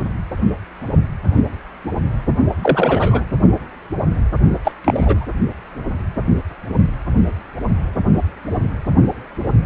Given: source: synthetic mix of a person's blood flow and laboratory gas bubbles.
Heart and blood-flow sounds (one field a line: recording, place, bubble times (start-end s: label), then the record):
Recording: Doppler ultrasound of blood flow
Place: precordium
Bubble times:
2.61-3.25 s: bubbles
4.64-4.72 s: bubbles
4.84-5.26 s: bubbles
From the record:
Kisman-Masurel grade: 223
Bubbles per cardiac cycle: several, 3 to 8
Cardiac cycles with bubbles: 10 to 50%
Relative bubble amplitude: loud (0.450 to 0.775)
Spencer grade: 2 (many but less than half of the cardiac periods contain bubble signals, singularly or in groups)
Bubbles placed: only in the low amplitude regions of the cardiac cycle